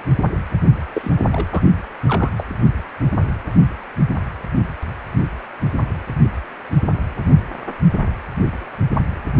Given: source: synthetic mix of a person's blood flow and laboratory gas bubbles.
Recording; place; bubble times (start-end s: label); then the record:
Doppler ultrasound of blood flow; precordium
0.94-1.13 s: bubbles
1.32-1.46 s: bubbles
1.50-1.63 s: bubbles
2.06-2.31 s: bubbles
2.36-2.44 s: bubbles
From the record:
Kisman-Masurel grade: 212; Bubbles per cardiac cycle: several, 3 to 8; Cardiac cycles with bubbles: 1 to 10%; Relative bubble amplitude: moderate (0.250 to 0.450); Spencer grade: 1 (occasional bubble signal discernible with the cardiac motion signal, with majority of cardiac periods free of bubbles); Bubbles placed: only in the low amplitude regions of the cardiac cycle